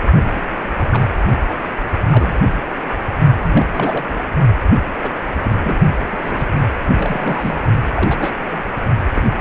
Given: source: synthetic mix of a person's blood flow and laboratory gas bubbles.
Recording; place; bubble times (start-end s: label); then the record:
Doppler ultrasound of blood flow; precordium
0.23-0.42 s: bubbles
0.79-0.87 s: bubbles
0.91-1.04 s: bubbles
1.49-1.56 s: bubbles
2.11-2.38 s: bubbles
3.42-3.66 s: bubbles
3.74-4.20 s: bubbles
5.02-5.14 s: bubbles
5.41-5.55 s: bubbles
5.63-5.80 s: bubbles
6.10-6.18 s: bubbles
6.21-6.46 s: bubbles
6.96-7.61 s: bubbles
7.89-8.32 s: bubbles
8.48-8.63 s: bubbles
9.15-9.29 s: bubbles
From the record:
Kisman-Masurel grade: 242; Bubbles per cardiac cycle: several, 3 to 8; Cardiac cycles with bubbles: 100%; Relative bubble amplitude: moderate (0.250 to 0.450); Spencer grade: 3 (all of the cardiac periods contain showers or single bubble signals, but not dominating or overriding the cardiac motion signals); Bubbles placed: only in the low amplitude regions of the cardiac cycle